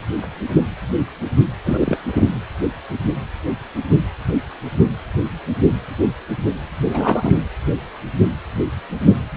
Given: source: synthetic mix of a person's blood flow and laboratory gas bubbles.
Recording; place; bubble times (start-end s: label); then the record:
Doppler ultrasound of blood flow; precordium
1.64-1.97 s: bubbles
2.12-2.40 s: bubbles
6.83-7.42 s: bubbles
From the record:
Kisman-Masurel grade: 222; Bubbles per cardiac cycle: several, 3 to 8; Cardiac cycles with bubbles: 10 to 50%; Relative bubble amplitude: moderate (0.250 to 0.450); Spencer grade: 2 (many but less than half of the cardiac periods contain bubble signals, singularly or in groups); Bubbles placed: anywhere in the cardiac cycle